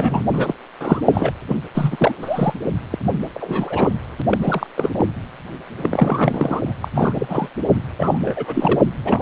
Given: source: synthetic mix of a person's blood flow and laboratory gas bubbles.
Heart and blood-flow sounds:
Doppler ultrasound of blood flow; precordium
0.00-0.22 s: bubbles
0.33-0.54 s: bubbles
0.80-1.32 s: bubbles
1.48-1.57 s: bubbles
1.74-2.14 s: bubbles
2.21-2.53 s: bubbles
2.90-2.99 s: bubbles
3.35-3.90 s: bubbles
4.19-4.22 s: bubbles
4.30-4.38 s: bubbles
4.42-4.67 s: bubbles
4.76-4.90 s: bubbles
4.94-5.05 s: bubbles
5.77-6.74 s: bubbles
6.80-6.88 s: bubbles
6.95-7.48 s: bubbles
7.99-8.80 s: bubbles
9.05-9.22 s: bubbles
From the record:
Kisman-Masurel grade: 342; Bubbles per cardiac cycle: rolling drumbeat, 9 or more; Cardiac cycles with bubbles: 100%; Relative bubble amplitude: moderate (0.250 to 0.450); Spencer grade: 3 (all of the cardiac periods contain showers or single bubble signals, but not dominating or overriding the cardiac motion signals); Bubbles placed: anywhere in the cardiac cycle

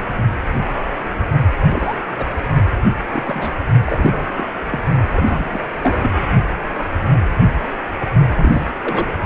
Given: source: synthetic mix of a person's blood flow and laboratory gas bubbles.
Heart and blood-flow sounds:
Doppler ultrasound of blood flow; precordium
1.69-1.95 s: bubbles
2.17-2.35 s: bubbles
3.09-3.52 s: bubbles
3.85-4.29 s: bubbles
4.36-4.43 s: bubbles
4.70-4.83 s: bubbles
5.14-5.66 s: bubbles
5.81-5.98 s: bubbles
6.02-6.14 s: bubbles
8.35-8.73 s: bubbles
8.81-9.08 s: bubbles
From the record:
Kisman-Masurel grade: 232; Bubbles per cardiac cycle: several, 3 to 8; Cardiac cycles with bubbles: 50 to 99%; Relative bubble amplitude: moderate (0.250 to 0.450); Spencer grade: 3 (all of the cardiac periods contain showers or single bubble signals, but not dominating or overriding the cardiac motion signals); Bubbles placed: only in the low amplitude regions of the cardiac cycle

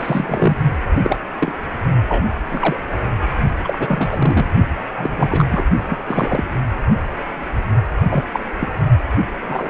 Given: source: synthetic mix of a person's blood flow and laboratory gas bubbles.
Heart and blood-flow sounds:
Doppler ultrasound of blood flow; precordium
0.00-0.57 s: bubbles
1.03-1.19 s: bubbles
1.39-1.52 s: bubbles
2.08-2.26 s: bubbles
2.51-2.80 s: bubbles
3.64-4.46 s: bubbles
4.96-5.65 s: bubbles
5.89-5.99 s: bubbles
6.07-6.47 s: bubbles
8.10-8.24 s: bubbles
8.33-8.39 s: bubbles
8.60-8.69 s: bubbles
9.49-9.70 s: bubbles
From the record:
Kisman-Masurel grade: 243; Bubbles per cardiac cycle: several, 3 to 8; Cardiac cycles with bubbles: 100%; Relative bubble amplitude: loud (0.450 to 0.775); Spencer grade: 3 (all of the cardiac periods contain showers or single bubble signals, but not dominating or overriding the cardiac motion signals); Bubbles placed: only in the low amplitude regions of the cardiac cycle

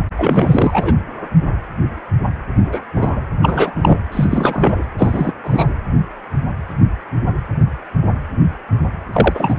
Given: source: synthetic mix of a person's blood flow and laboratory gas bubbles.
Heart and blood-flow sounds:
Doppler ultrasound of blood flow; precordium
0.18-0.94 s: bubbles
2.72-2.79 s: bubbles
2.96-3.22 s: bubbles
3.42-3.72 s: bubbles
3.75-4.00 s: bubbles
4.11-4.84 s: bubbles
4.98-5.33 s: bubbles
5.43-5.75 s: bubbles
9.12-9.54 s: bubbles
From the record:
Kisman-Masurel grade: 223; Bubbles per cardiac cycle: several, 3 to 8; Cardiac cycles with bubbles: 10 to 50%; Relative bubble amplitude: loud (0.450 to 0.775); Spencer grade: 2 (many but less than half of the cardiac periods contain bubble signals, singularly or in groups); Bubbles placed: anywhere in the cardiac cycle

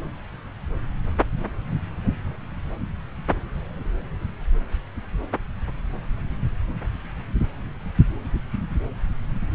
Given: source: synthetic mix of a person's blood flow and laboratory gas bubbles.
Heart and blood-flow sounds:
Doppler ultrasound of blood flow; subclavian vein
no bubbles
From the record:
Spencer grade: 0 (complete lack of bubble signals)

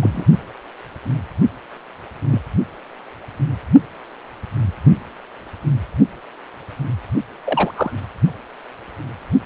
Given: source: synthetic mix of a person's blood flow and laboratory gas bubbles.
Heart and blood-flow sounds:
Doppler ultrasound of blood flow; precordium
0.01-0.25 s: bubbles
2.29-2.41 s: bubbles
7.44-7.72 s: bubbles
7.76-7.91 s: bubbles
From the record:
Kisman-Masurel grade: 122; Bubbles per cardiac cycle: 1 to 2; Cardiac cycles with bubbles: 10 to 50%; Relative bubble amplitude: moderate (0.250 to 0.450); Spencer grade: 2 (many but less than half of the cardiac periods contain bubble signals, singularly or in groups); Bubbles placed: only in the low amplitude regions of the cardiac cycle

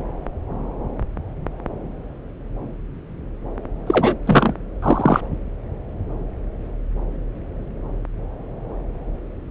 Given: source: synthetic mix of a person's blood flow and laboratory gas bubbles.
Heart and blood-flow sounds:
Doppler ultrasound of blood flow; subclavian vein
3.87-4.16 s: bubbles
4.25-4.54 s: bubbles
4.82-5.21 s: bubbles
From the record:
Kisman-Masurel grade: 213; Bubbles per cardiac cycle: several, 3 to 8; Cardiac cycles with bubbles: 1 to 10%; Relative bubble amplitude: loud (0.450 to 0.775); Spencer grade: 1 (occasional bubble signal discernible with the cardiac motion signal, with majority of cardiac periods free of bubbles); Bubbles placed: anywhere in the cardiac cycle

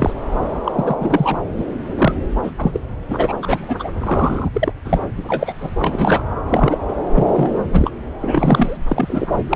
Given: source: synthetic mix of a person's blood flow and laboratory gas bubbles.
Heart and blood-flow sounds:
Doppler ultrasound of blood flow; subclavian vein
0.00-0.13 s: bubbles
0.64-0.96 s: bubbles
0.99-1.39 s: bubbles
1.57-1.64 s: bubbles
1.97-2.13 s: bubbles
2.43-2.51 s: bubbles
2.58-2.80 s: bubbles
3.08-3.33 s: bubbles
3.42-3.88 s: bubbles
4.00-4.49 s: bubbles
4.53-4.73 s: bubbles
4.84-5.00 s: bubbles
5.27-5.53 s: bubbles
5.61-5.71 s: bubbles
5.79-6.23 s: bubbles
6.49-6.78 s: bubbles
6.88-6.95 s: bubbles
7.15-7.27 s: bubbles
7.33-7.51 s: bubbles
7.72-7.91 s: bubbles
8.21-8.77 s: bubbles
8.86-9.27 s: bubbles
9.37-9.43 s: bubbles
9.49-9.56 s: bubbles
From the record:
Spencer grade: 3 (all of the cardiac periods contain showers or single bubble signals, but not dominating or overriding the cardiac motion signals); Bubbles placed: anywhere in the cardiac cycle

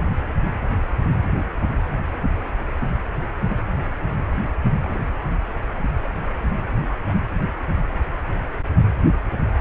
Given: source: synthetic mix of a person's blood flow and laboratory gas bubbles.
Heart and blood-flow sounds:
Doppler ultrasound of blood flow; precordium
4.81-5.00 s: bubbles
5.30-5.36 s: bubbles
5.79-5.83 s: bubbles
6.03-6.11 s: bubbles
From the record:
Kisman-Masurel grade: 211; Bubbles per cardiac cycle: several, 3 to 8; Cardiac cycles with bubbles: 1 to 10%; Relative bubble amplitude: barely perceptible (0.100 to 0.250); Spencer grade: 1 (occasional bubble signal discernible with the cardiac motion signal, with majority of cardiac periods free of bubbles); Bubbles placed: anywhere in the cardiac cycle

